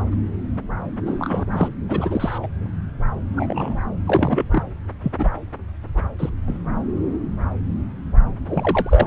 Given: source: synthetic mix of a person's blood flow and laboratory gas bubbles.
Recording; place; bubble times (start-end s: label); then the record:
Doppler ultrasound of blood flow; subclavian vein
1.05-1.45 s: bubbles
1.52-1.68 s: bubbles
1.89-2.38 s: bubbles
2.42-2.47 s: bubbles
3.36-3.77 s: bubbles
4.05-4.44 s: bubbles
4.50-4.63 s: bubbles
5.03-5.12 s: bubbles
5.18-5.30 s: bubbles
6.18-6.29 s: bubbles
6.47-6.58 s: bubbles
8.46-9.07 s: bubbles
From the record:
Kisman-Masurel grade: 232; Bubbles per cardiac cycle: several, 3 to 8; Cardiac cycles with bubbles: 50 to 99%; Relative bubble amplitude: moderate (0.250 to 0.450); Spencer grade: 3 (all of the cardiac periods contain showers or single bubble signals, but not dominating or overriding the cardiac motion signals); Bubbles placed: anywhere in the cardiac cycle